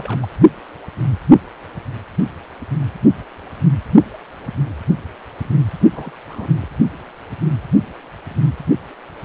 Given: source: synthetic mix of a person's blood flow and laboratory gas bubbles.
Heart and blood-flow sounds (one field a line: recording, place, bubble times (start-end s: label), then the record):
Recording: Doppler ultrasound of blood flow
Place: precordium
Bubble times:
0.00-0.27 s: bubbles
5.90-6.10 s: bubbles
6.28-6.47 s: bubbles
6.61-6.66 s: bubbles
From the record:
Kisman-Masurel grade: 221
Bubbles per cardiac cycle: several, 3 to 8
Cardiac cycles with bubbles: 10 to 50%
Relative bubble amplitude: barely perceptible (0.100 to 0.250)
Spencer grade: 2 (many but less than half of the cardiac periods contain bubble signals, singularly or in groups)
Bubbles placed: only in the low amplitude regions of the cardiac cycle